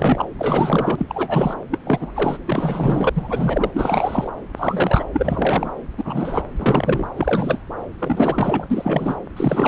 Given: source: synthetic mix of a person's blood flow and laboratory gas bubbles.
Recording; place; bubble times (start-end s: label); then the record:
Doppler ultrasound of blood flow; subclavian vein
0.00-0.26 s: bubbles
0.39-0.95 s: bubbles
0.98-1.54 s: bubbles
1.71-1.78 s: bubbles
1.86-2.11 s: bubbles
2.15-2.38 s: bubbles
2.48-3.09 s: bubbles
3.15-3.70 s: bubbles
3.73-4.32 s: bubbles
4.56-5.04 s: bubbles
5.12-5.70 s: bubbles
5.98-6.43 s: bubbles
6.56-7.08 s: bubbles
7.17-7.60 s: bubbles
7.99-9.16 s: bubbles
9.36-9.68 s: bubbles
From the record:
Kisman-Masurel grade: 342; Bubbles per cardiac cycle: rolling drumbeat, 9 or more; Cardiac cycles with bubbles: 100%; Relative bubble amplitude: moderate (0.250 to 0.450); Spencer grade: 3 (all of the cardiac periods contain showers or single bubble signals, but not dominating or overriding the cardiac motion signals); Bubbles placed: anywhere in the cardiac cycle